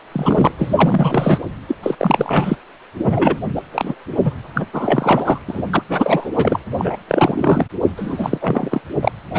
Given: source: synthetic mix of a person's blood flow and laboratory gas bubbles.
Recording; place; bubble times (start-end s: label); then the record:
Doppler ultrasound of blood flow; precordium
0.12-0.52 s: bubbles
0.58-1.39 s: bubbles
1.68-1.75 s: bubbles
1.83-1.95 s: bubbles
1.98-2.56 s: bubbles
3.04-3.36 s: bubbles
3.55-3.61 s: bubbles
3.72-3.95 s: bubbles
4.25-4.33 s: bubbles
4.54-4.66 s: bubbles
4.72-5.38 s: bubbles
5.47-5.71 s: bubbles
5.73-5.82 s: bubbles
5.89-6.30 s: bubbles
6.35-6.59 s: bubbles
6.78-6.96 s: bubbles
7.08-7.64 s: bubbles
7.97-8.38 s: bubbles
8.41-8.82 s: bubbles
9.02-9.12 s: bubbles
9.34-9.39 s: bubbles
From the record:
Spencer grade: 3 (all of the cardiac periods contain showers or single bubble signals, but not dominating or overriding the cardiac motion signals); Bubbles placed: anywhere in the cardiac cycle